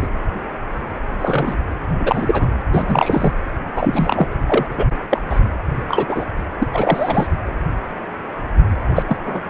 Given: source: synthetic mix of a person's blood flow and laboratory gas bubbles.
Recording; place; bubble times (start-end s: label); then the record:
Doppler ultrasound of blood flow; precordium
0.00-0.07 s: bubbles
1.18-1.56 s: bubbles
2.00-2.48 s: bubbles
2.72-3.33 s: bubbles
3.75-4.28 s: bubbles
4.46-4.67 s: bubbles
4.77-4.86 s: bubbles
5.10-5.21 s: bubbles
5.29-5.39 s: bubbles
5.88-6.05 s: bubbles
6.08-6.25 s: bubbles
6.59-6.70 s: bubbles
6.73-7.27 s: bubbles
8.95-9.03 s: bubbles
9.07-9.16 s: bubbles
9.25-9.41 s: bubbles
From the record:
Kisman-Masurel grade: 233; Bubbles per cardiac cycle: several, 3 to 8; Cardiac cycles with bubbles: 50 to 99%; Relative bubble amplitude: loud (0.450 to 0.775); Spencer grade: 3 (all of the cardiac periods contain showers or single bubble signals, but not dominating or overriding the cardiac motion signals); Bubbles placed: anywhere in the cardiac cycle